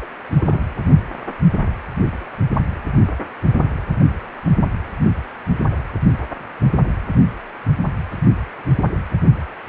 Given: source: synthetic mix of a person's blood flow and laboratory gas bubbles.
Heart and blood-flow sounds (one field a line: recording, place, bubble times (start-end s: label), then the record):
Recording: Doppler ultrasound of blood flow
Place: precordium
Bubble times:
0.01-0.06 s: bubbles
0.35-0.67 s: bubbles
From the record:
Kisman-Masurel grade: 211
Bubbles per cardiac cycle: several, 3 to 8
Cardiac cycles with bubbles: 1 to 10%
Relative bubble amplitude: barely perceptible (0.100 to 0.250)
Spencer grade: 1 (occasional bubble signal discernible with the cardiac motion signal, with majority of cardiac periods free of bubbles)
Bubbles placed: anywhere in the cardiac cycle